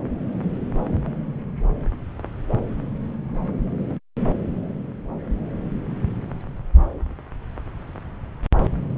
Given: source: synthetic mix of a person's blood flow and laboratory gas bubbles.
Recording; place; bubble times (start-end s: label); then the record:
Doppler ultrasound of blood flow; subclavian vein
no bubbles
From the record:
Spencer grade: 0 (complete lack of bubble signals)